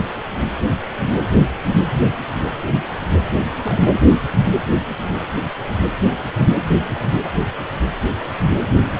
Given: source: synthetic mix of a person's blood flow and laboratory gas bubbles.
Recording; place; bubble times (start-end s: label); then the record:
Doppler ultrasound of blood flow; precordium
3.41-3.45 s: bubbles
3.63-3.96 s: bubbles
From the record:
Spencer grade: 2 (many but less than half of the cardiac periods contain bubble signals, singularly or in groups); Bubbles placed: anywhere in the cardiac cycle